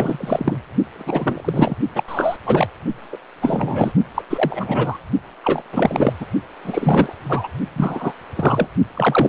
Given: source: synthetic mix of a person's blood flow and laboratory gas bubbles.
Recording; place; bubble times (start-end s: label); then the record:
Doppler ultrasound of blood flow; precordium
0.00-0.58 s: bubbles
0.92-1.76 s: bubbles
1.95-2.04 s: bubbles
2.08-2.37 s: bubbles
2.44-2.68 s: bubbles
3.12-3.18 s: bubbles
3.42-3.92 s: bubbles
4.14-4.22 s: bubbles
4.29-4.98 s: bubbles
5.43-5.62 s: bubbles
5.72-6.13 s: bubbles
6.20-6.25 s: bubbles
6.64-7.13 s: bubbles
7.29-7.48 s: bubbles
7.76-8.13 s: bubbles
8.35-8.69 s: bubbles
8.94-9.29 s: bubbles
From the record:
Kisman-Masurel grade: 343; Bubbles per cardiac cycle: rolling drumbeat, 9 or more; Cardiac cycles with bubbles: 100%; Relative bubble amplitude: loud (0.450 to 0.775); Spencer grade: 3 (all of the cardiac periods contain showers or single bubble signals, but not dominating or overriding the cardiac motion signals); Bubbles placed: only in the low amplitude regions of the cardiac cycle